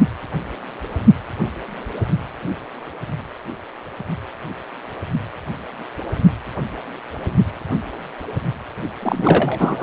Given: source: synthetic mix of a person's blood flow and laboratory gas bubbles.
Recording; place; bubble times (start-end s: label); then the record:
Doppler ultrasound of blood flow; precordium
9.01-9.83 s: bubbles
From the record:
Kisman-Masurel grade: 213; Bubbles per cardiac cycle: several, 3 to 8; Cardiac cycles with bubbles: 1 to 10%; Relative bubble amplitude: loud (0.450 to 0.775); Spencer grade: 1 (occasional bubble signal discernible with the cardiac motion signal, with majority of cardiac periods free of bubbles); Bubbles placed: only in the low amplitude regions of the cardiac cycle